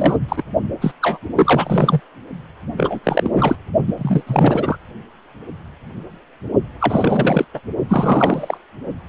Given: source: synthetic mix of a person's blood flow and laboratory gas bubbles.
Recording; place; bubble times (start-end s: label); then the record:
Doppler ultrasound of blood flow; precordium
0.00-0.17 s: bubbles
0.28-0.43 s: bubbles
0.81-0.92 s: bubbles
1.02-1.18 s: bubbles
1.36-2.00 s: bubbles
2.76-2.99 s: bubbles
3.03-3.30 s: bubbles
3.33-3.56 s: bubbles
3.88-3.95 s: bubbles
3.97-4.23 s: bubbles
4.26-4.76 s: bubbles
6.80-7.45 s: bubbles
7.54-7.61 s: bubbles
7.89-8.57 s: bubbles
From the record:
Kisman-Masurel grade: 333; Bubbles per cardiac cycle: rolling drumbeat, 9 or more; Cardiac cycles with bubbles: 50 to 99%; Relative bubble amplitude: loud (0.450 to 0.775); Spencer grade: 3 (all of the cardiac periods contain showers or single bubble signals, but not dominating or overriding the cardiac motion signals); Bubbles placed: only in the low amplitude regions of the cardiac cycle